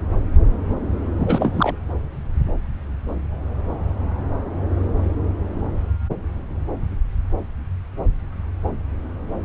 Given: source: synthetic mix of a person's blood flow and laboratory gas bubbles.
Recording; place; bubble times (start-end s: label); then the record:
Doppler ultrasound of blood flow; subclavian vein
1.17-1.76 s: bubbles
From the record:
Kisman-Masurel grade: 212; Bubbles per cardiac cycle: several, 3 to 8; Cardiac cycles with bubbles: 1 to 10%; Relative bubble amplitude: moderate (0.250 to 0.450); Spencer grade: 1 (occasional bubble signal discernible with the cardiac motion signal, with majority of cardiac periods free of bubbles); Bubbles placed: anywhere in the cardiac cycle